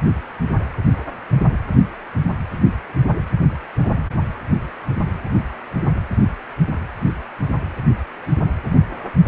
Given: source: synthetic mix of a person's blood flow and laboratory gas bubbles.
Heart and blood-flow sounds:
Doppler ultrasound of blood flow; precordium
no bubbles
From the record:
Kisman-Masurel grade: 000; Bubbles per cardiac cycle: 0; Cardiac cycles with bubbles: 0%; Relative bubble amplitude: no bubbles discernible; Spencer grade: 0 (complete lack of bubble signals)

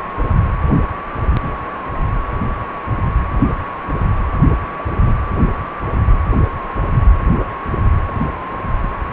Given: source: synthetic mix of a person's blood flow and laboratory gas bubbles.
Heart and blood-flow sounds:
Doppler ultrasound of blood flow; precordium
4.78-4.83 s: bubbles
5.06-5.14 s: bubbles
From the record:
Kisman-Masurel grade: 112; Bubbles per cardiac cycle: 1 to 2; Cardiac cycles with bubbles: 1 to 10%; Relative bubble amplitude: moderate (0.250 to 0.450); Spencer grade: 1 (occasional bubble signal discernible with the cardiac motion signal, with majority of cardiac periods free of bubbles); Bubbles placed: anywhere in the cardiac cycle

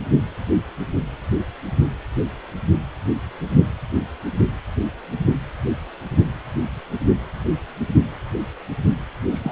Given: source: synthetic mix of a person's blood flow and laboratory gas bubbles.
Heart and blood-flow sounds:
Doppler ultrasound of blood flow; precordium
9.31-9.52 s: bubbles
From the record:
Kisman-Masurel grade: 212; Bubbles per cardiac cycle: several, 3 to 8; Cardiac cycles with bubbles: 1 to 10%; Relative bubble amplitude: moderate (0.250 to 0.450); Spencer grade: 1 (occasional bubble signal discernible with the cardiac motion signal, with majority of cardiac periods free of bubbles); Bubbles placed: anywhere in the cardiac cycle

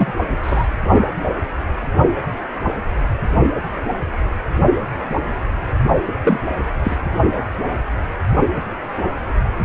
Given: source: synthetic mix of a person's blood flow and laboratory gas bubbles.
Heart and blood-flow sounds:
Doppler ultrasound of blood flow; precordium
0.00-0.13 s: bubbles
0.43-0.68 s: bubbles
6.24-6.39 s: bubbles
6.84-6.96 s: bubbles
From the record:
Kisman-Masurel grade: 122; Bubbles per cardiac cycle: 1 to 2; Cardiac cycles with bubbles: 10 to 50%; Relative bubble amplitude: moderate (0.250 to 0.450); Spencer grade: 2 (many but less than half of the cardiac periods contain bubble signals, singularly or in groups); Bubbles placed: only in the low amplitude regions of the cardiac cycle

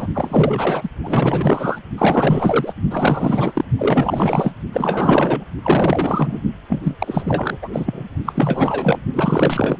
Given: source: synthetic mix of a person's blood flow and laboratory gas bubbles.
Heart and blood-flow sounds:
Doppler ultrasound of blood flow; precordium
0.00-0.07 s: bubbles
0.14-0.90 s: bubbles
1.03-1.79 s: bubbles
1.98-2.73 s: bubbles
2.90-3.65 s: bubbles
3.78-4.52 s: bubbles
4.73-5.45 s: bubbles
5.62-6.40 s: bubbles
6.69-6.81 s: bubbles
6.83-6.94 s: bubbles
6.99-7.58 s: bubbles
7.62-7.69 s: bubbles
7.73-8.04 s: bubbles
8.25-8.33 s: bubbles
8.35-9.00 s: bubbles
9.13-9.78 s: bubbles
From the record:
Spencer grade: 4 (maximum detectable bubble signal sounding continuously throughout systole and diastole of every cardiac period, and overriding the amplitude of the normal cardiac signals); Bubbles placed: only in the low amplitude regions of the cardiac cycle

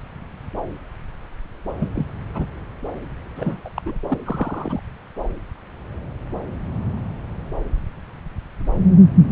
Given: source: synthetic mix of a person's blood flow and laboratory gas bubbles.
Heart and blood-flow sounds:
Doppler ultrasound of blood flow; subclavian vein
1.79-1.89 s: bubbles
1.95-2.08 s: bubbles
2.34-2.46 s: bubbles
3.35-3.61 s: bubbles
3.65-3.70 s: bubbles
3.76-3.82 s: bubbles
3.86-3.99 s: bubbles
4.09-4.18 s: bubbles
4.25-4.80 s: bubbles
9.29-9.32 s: bubbles
From the record:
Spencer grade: 2 (many but less than half of the cardiac periods contain bubble signals, singularly or in groups); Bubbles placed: anywhere in the cardiac cycle

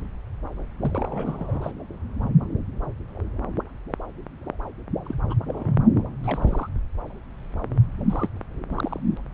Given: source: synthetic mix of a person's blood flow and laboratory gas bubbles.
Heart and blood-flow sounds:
Doppler ultrasound of blood flow; subclavian vein
0.80-1.72 s: bubbles
5.05-5.14 s: bubbles
5.28-5.35 s: bubbles
5.46-5.76 s: bubbles
6.23-6.69 s: bubbles
8.09-8.29 s: bubbles
8.70-8.99 s: bubbles
From the record:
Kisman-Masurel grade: 221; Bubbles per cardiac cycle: several, 3 to 8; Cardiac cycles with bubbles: 10 to 50%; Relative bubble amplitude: barely perceptible (0.100 to 0.250); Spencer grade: 2 (many but less than half of the cardiac periods contain bubble signals, singularly or in groups); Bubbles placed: anywhere in the cardiac cycle

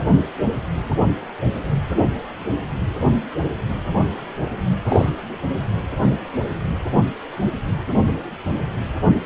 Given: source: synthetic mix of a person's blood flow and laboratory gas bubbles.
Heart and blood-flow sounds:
Doppler ultrasound of blood flow; precordium
4.88-5.10 s: bubbles
From the record:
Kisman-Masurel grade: 122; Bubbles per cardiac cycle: 1 to 2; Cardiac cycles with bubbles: 10 to 50%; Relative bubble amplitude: moderate (0.250 to 0.450); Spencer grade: 2 (many but less than half of the cardiac periods contain bubble signals, singularly or in groups); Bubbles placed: anywhere in the cardiac cycle

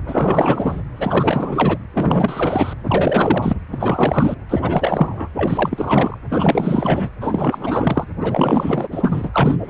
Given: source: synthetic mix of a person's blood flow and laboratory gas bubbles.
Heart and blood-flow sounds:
Doppler ultrasound of blood flow; precordium
0.07-0.82 s: bubbles
0.96-1.78 s: bubbles
1.95-2.74 s: bubbles
2.83-3.57 s: bubbles
3.72-4.35 s: bubbles
4.49-5.29 s: bubbles
5.35-6.18 s: bubbles
6.29-7.10 s: bubbles
7.21-8.04 s: bubbles
8.21-8.88 s: bubbles
8.92-9.56 s: bubbles
9.67-9.70 s: bubbles
From the record:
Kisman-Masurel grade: 444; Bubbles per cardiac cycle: continuous sound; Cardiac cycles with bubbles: 100%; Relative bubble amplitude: maximal (0.775 to 0.999); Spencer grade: 4 (maximum detectable bubble signal sounding continuously throughout systole and diastole of every cardiac period, and overriding the amplitude of the normal cardiac signals); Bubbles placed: anywhere in the cardiac cycle

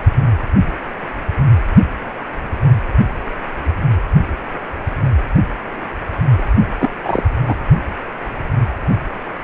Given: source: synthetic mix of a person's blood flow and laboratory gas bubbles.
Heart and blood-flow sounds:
Doppler ultrasound of blood flow; precordium
6.38-6.42 s: bubbles
6.79-6.90 s: bubbles
7.03-7.22 s: bubbles
7.47-7.55 s: bubbles
From the record:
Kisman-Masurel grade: 213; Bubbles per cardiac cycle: several, 3 to 8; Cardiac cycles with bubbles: 1 to 10%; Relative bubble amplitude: loud (0.450 to 0.775); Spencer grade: 1 (occasional bubble signal discernible with the cardiac motion signal, with majority of cardiac periods free of bubbles); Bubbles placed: anywhere in the cardiac cycle

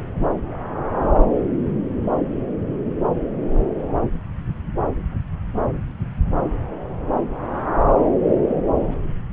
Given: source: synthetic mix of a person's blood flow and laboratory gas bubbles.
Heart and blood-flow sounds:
Doppler ultrasound of blood flow; subclavian vein
no bubbles
From the record:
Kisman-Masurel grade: 000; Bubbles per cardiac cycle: 0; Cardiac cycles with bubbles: 0%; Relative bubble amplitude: no bubbles discernible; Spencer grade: 0 (complete lack of bubble signals)

